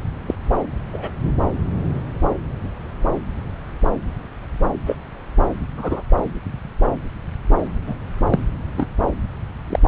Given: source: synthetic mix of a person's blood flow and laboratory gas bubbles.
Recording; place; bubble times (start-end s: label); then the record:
Doppler ultrasound of blood flow; subclavian vein
0.28-0.34 s: bubbles
0.92-1.10 s: bubbles
4.86-4.96 s: bubbles
5.77-6.02 s: bubbles
7.87-7.94 s: bubbles
8.30-8.39 s: bubbles
8.77-8.87 s: bubbles
9.69-9.79 s: bubbles
From the record:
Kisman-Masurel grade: 122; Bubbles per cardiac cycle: 1 to 2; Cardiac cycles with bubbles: 10 to 50%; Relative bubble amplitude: moderate (0.250 to 0.450); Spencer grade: 2 (many but less than half of the cardiac periods contain bubble signals, singularly or in groups); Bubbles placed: anywhere in the cardiac cycle